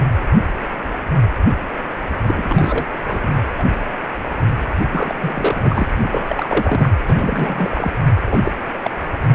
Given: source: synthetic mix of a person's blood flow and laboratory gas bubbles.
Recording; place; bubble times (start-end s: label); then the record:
Doppler ultrasound of blood flow; precordium
2.21-2.85 s: bubbles
3.01-3.41 s: bubbles
3.45-3.52 s: bubbles
3.57-3.63 s: bubbles
4.92-5.15 s: bubbles
5.21-5.89 s: bubbles
6.00-6.89 s: bubbles
7.07-7.92 s: bubbles
8.27-8.52 s: bubbles
8.73-8.78 s: bubbles
8.84-8.91 s: bubbles
From the record:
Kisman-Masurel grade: 332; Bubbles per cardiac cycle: rolling drumbeat, 9 or more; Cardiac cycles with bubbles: 50 to 99%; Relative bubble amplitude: moderate (0.250 to 0.450); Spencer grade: 3 (all of the cardiac periods contain showers or single bubble signals, but not dominating or overriding the cardiac motion signals); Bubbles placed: anywhere in the cardiac cycle